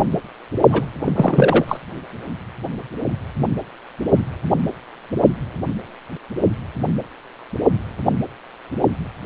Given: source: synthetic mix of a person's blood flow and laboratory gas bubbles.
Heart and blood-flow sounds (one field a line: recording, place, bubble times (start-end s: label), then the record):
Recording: Doppler ultrasound of blood flow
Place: precordium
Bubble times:
0.69-0.85 s: bubbles
1.04-1.65 s: bubbles
1.67-1.77 s: bubbles
From the record:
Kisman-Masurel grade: 213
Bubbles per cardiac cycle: several, 3 to 8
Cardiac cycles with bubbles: 1 to 10%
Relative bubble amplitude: loud (0.450 to 0.775)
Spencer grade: 1 (occasional bubble signal discernible with the cardiac motion signal, with majority of cardiac periods free of bubbles)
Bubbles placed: only in the low amplitude regions of the cardiac cycle